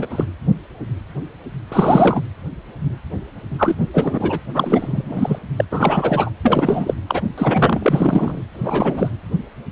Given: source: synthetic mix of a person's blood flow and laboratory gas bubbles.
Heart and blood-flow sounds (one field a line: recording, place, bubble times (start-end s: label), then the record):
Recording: Doppler ultrasound of blood flow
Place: precordium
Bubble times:
0.00-0.07 s: bubbles
0.10-0.24 s: bubbles
1.69-2.21 s: bubbles
3.58-3.76 s: bubbles
3.94-4.40 s: bubbles
4.54-5.39 s: bubbles
5.57-5.65 s: bubbles
5.71-6.29 s: bubbles
6.45-6.94 s: bubbles
7.08-7.22 s: bubbles
7.38-8.43 s: bubbles
8.54-9.11 s: bubbles
From the record:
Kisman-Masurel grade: 333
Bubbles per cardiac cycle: rolling drumbeat, 9 or more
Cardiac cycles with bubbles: 50 to 99%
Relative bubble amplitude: loud (0.450 to 0.775)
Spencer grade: 3 (all of the cardiac periods contain showers or single bubble signals, but not dominating or overriding the cardiac motion signals)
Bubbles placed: anywhere in the cardiac cycle